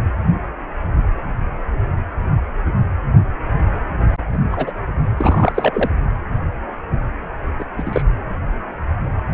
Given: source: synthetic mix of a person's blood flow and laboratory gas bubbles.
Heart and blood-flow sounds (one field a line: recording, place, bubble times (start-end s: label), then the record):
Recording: Doppler ultrasound of blood flow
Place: precordium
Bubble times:
4.33-4.38 s: bubbles
4.51-4.72 s: bubbles
5.17-5.91 s: bubbles
7.59-7.65 s: bubbles
7.78-8.03 s: bubbles
From the record:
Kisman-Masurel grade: 222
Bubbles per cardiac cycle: several, 3 to 8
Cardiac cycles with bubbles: 10 to 50%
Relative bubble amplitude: moderate (0.250 to 0.450)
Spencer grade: 2 (many but less than half of the cardiac periods contain bubble signals, singularly or in groups)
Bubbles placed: anywhere in the cardiac cycle